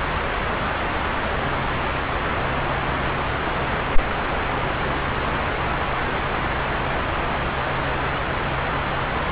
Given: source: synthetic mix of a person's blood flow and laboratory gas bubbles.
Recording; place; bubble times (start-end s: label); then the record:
Doppler ultrasound of blood flow; subclavian vein
no bubbles
From the record:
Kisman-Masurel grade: 000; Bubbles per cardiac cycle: 0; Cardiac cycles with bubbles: 0%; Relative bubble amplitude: no bubbles discernible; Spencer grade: 0 (complete lack of bubble signals)